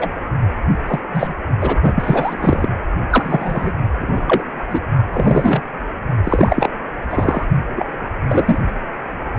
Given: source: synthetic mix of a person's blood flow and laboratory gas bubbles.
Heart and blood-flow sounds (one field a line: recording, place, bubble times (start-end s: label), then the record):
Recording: Doppler ultrasound of blood flow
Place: precordium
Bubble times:
0.00-0.22 s: bubbles
0.87-1.00 s: bubbles
1.14-1.34 s: bubbles
1.61-1.78 s: bubbles
1.82-2.69 s: bubbles
3.10-3.72 s: bubbles
3.99-4.43 s: bubbles
4.68-4.80 s: bubbles
5.12-5.62 s: bubbles
6.23-6.70 s: bubbles
7.10-7.45 s: bubbles
7.75-7.97 s: bubbles
8.29-8.58 s: bubbles
From the record:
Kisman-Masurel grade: 243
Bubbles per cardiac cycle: several, 3 to 8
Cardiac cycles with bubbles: 100%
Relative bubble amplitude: loud (0.450 to 0.775)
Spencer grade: 3 (all of the cardiac periods contain showers or single bubble signals, but not dominating or overriding the cardiac motion signals)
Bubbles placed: only in the low amplitude regions of the cardiac cycle